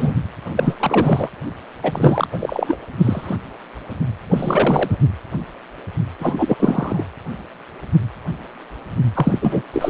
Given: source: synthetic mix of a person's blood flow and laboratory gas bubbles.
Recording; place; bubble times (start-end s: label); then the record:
Doppler ultrasound of blood flow; precordium
0.00-0.15 s: bubbles
0.55-1.29 s: bubbles
1.83-2.28 s: bubbles
2.32-2.78 s: bubbles
3.01-3.37 s: bubbles
4.29-4.98 s: bubbles
6.19-6.56 s: bubbles
6.58-7.06 s: bubbles
9.14-9.62 s: bubbles
9.72-9.90 s: bubbles
From the record:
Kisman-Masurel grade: 333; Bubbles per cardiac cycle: rolling drumbeat, 9 or more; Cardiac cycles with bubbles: 50 to 99%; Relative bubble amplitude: loud (0.450 to 0.775); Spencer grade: 3 (all of the cardiac periods contain showers or single bubble signals, but not dominating or overriding the cardiac motion signals); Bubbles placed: anywhere in the cardiac cycle